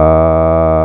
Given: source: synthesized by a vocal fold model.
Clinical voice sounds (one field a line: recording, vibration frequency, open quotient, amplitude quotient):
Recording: sustained vowel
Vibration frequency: 80 Hz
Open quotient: 0.5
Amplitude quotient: 1.1